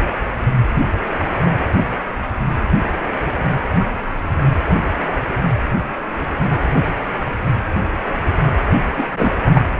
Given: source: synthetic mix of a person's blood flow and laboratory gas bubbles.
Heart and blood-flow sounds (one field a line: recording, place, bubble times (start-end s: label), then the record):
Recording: Doppler ultrasound of blood flow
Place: precordium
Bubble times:
8.96-9.05 s: bubbles
9.13-9.30 s: bubbles
9.45-9.61 s: bubbles
From the record:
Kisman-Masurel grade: 223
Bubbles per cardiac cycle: several, 3 to 8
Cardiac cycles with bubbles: 10 to 50%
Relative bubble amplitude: loud (0.450 to 0.775)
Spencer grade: 2 (many but less than half of the cardiac periods contain bubble signals, singularly or in groups)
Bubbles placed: anywhere in the cardiac cycle